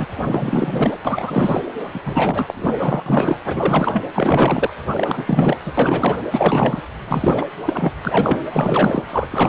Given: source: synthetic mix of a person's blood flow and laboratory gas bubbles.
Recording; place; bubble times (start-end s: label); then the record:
Doppler ultrasound of blood flow; precordium
0.00-0.06 s: bubbles
0.20-0.98 s: bubbles
1.04-1.67 s: bubbles
1.93-2.00 s: bubbles
2.06-3.03 s: bubbles
3.06-3.37 s: bubbles
3.45-4.02 s: bubbles
4.14-4.73 s: bubbles
4.91-5.57 s: bubbles
5.65-5.73 s: bubbles
5.77-6.17 s: bubbles
6.31-6.81 s: bubbles
7.07-7.46 s: bubbles
7.65-7.92 s: bubbles
8.05-8.39 s: bubbles
8.53-9.03 s: bubbles
9.12-9.27 s: bubbles
9.30-9.49 s: bubbles
From the record:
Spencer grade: 4 (maximum detectable bubble signal sounding continuously throughout systole and diastole of every cardiac period, and overriding the amplitude of the normal cardiac signals); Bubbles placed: anywhere in the cardiac cycle